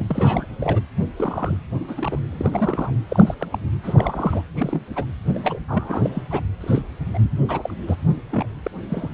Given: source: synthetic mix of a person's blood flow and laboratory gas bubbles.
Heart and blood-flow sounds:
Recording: Doppler ultrasound of blood flow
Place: precordium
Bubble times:
0.00-0.05 s: bubbles
0.09-0.45 s: bubbles
0.59-0.80 s: bubbles
1.17-1.58 s: bubbles
1.88-1.95 s: bubbles
1.97-2.19 s: bubbles
2.32-2.91 s: bubbles
3.08-3.35 s: bubbles
3.40-3.48 s: bubbles
3.50-3.58 s: bubbles
3.83-4.42 s: bubbles
4.55-4.81 s: bubbles
4.95-5.04 s: bubbles
5.34-5.40 s: bubbles
5.43-5.65 s: bubbles
5.68-6.09 s: bubbles
6.15-6.25 s: bubbles
6.30-6.41 s: bubbles
6.61-6.83 s: bubbles
7.13-7.19 s: bubbles
7.49-7.74 s: bubbles
7.87-7.96 s: bubbles
8.30-8.46 s: bubbles
8.64-8.68 s: bubbles
8.89-9.09 s: bubbles
From the record:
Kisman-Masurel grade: 242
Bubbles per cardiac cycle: several, 3 to 8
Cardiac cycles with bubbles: 100%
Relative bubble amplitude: moderate (0.250 to 0.450)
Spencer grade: 3 (all of the cardiac periods contain showers or single bubble signals, but not dominating or overriding the cardiac motion signals)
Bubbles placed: anywhere in the cardiac cycle

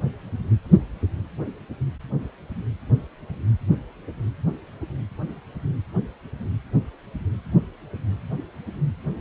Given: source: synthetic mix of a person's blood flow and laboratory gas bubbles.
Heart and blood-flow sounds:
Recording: Doppler ultrasound of blood flow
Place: precordium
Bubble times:
no bubbles
From the record:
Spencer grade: 0 (complete lack of bubble signals)

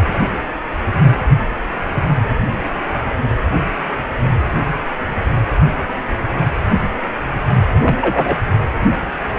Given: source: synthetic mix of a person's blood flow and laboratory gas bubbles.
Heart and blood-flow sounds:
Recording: Doppler ultrasound of blood flow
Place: precordium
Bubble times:
7.83-7.97 s: bubbles
8.01-8.38 s: bubbles
From the record:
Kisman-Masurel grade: 213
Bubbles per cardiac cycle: several, 3 to 8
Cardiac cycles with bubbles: 1 to 10%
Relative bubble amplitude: loud (0.450 to 0.775)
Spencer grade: 1 (occasional bubble signal discernible with the cardiac motion signal, with majority of cardiac periods free of bubbles)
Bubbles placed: anywhere in the cardiac cycle

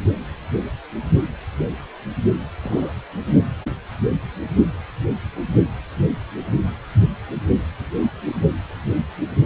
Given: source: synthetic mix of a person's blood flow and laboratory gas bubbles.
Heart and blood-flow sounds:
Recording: Doppler ultrasound of blood flow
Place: precordium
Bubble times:
2.62-2.93 s: bubbles
From the record:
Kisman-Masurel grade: 111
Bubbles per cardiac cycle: 1 to 2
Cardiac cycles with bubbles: 1 to 10%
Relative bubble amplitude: barely perceptible (0.100 to 0.250)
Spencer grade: 1 (occasional bubble signal discernible with the cardiac motion signal, with majority of cardiac periods free of bubbles)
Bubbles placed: only in the low amplitude regions of the cardiac cycle

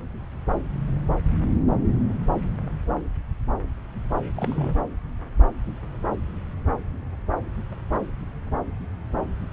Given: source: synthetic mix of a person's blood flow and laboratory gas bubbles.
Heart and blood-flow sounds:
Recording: Doppler ultrasound of blood flow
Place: subclavian vein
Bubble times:
4.36-4.75 s: bubbles
From the record:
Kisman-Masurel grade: 111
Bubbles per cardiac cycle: 1 to 2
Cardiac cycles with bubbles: 1 to 10%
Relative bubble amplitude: barely perceptible (0.100 to 0.250)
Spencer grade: 1 (occasional bubble signal discernible with the cardiac motion signal, with majority of cardiac periods free of bubbles)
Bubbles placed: anywhere in the cardiac cycle

